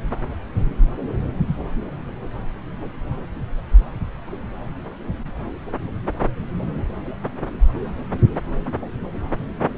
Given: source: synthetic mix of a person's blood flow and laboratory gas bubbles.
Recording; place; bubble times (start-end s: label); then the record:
Doppler ultrasound of blood flow; subclavian vein
1.47-1.56 s: bubbles
1.59-1.63 s: bubbles
From the record:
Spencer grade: 1 (occasional bubble signal discernible with the cardiac motion signal, with majority of cardiac periods free of bubbles); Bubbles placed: anywhere in the cardiac cycle